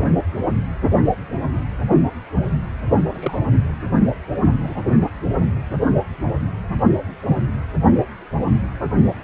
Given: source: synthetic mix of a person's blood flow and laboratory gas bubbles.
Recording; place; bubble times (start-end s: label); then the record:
Doppler ultrasound of blood flow; precordium
3.13-3.40 s: bubbles
4.66-4.83 s: bubbles
From the record:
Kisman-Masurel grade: 111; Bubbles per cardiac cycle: 1 to 2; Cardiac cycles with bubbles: 1 to 10%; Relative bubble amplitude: barely perceptible (0.100 to 0.250); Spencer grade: 1 (occasional bubble signal discernible with the cardiac motion signal, with majority of cardiac periods free of bubbles); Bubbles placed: only in the low amplitude regions of the cardiac cycle